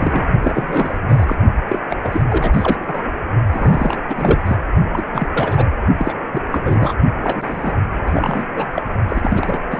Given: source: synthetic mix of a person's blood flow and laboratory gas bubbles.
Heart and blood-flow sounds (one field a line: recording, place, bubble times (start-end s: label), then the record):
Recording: Doppler ultrasound of blood flow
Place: precordium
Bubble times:
0.00-0.27 s: bubbles
0.40-0.97 s: bubbles
1.08-1.36 s: bubbles
1.68-1.79 s: bubbles
1.90-2.22 s: bubbles
2.30-3.02 s: bubbles
3.52-4.00 s: bubbles
4.09-4.56 s: bubbles
4.93-5.02 s: bubbles
5.07-5.27 s: bubbles
5.33-5.66 s: bubbles
5.96-6.13 s: bubbles
6.32-6.41 s: bubbles
6.51-6.94 s: bubbles
7.21-7.73 s: bubbles
8.05-8.46 s: bubbles
8.57-8.67 s: bubbles
8.73-8.82 s: bubbles
9.08-9.59 s: bubbles
9.71-9.79 s: bubbles
From the record:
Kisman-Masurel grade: 342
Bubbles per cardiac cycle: rolling drumbeat, 9 or more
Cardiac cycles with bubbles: 100%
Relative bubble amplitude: moderate (0.250 to 0.450)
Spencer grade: 3 (all of the cardiac periods contain showers or single bubble signals, but not dominating or overriding the cardiac motion signals)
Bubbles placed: only in the low amplitude regions of the cardiac cycle